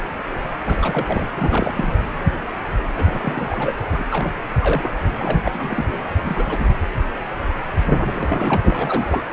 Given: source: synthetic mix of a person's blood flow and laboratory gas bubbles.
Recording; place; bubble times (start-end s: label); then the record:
Doppler ultrasound of blood flow; precordium
0.62-1.26 s: bubbles
1.34-1.93 s: bubbles
2.94-3.73 s: bubbles
3.92-4.05 s: bubbles
4.11-4.33 s: bubbles
4.62-4.91 s: bubbles
5.08-5.85 s: bubbles
5.91-5.99 s: bubbles
6.20-6.66 s: bubbles
8.04-8.57 s: bubbles
8.63-9.24 s: bubbles
From the record:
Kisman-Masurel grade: 332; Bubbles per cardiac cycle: rolling drumbeat, 9 or more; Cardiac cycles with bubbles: 50 to 99%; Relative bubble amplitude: moderate (0.250 to 0.450); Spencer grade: 3 (all of the cardiac periods contain showers or single bubble signals, but not dominating or overriding the cardiac motion signals); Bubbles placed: anywhere in the cardiac cycle